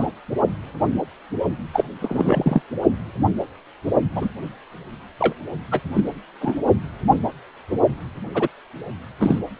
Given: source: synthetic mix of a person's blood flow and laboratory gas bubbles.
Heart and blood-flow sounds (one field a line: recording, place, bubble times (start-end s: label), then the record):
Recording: Doppler ultrasound of blood flow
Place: precordium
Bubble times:
0.00-0.09 s: bubbles
1.73-1.84 s: bubbles
2.01-2.62 s: bubbles
4.15-4.29 s: bubbles
5.19-5.34 s: bubbles
5.71-5.81 s: bubbles
5.94-6.09 s: bubbles
6.41-6.56 s: bubbles
8.34-8.48 s: bubbles
9.20-9.38 s: bubbles
From the record:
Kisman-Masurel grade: 233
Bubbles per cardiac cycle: several, 3 to 8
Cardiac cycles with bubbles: 50 to 99%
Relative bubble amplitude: loud (0.450 to 0.775)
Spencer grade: 3 (all of the cardiac periods contain showers or single bubble signals, but not dominating or overriding the cardiac motion signals)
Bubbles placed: only in the low amplitude regions of the cardiac cycle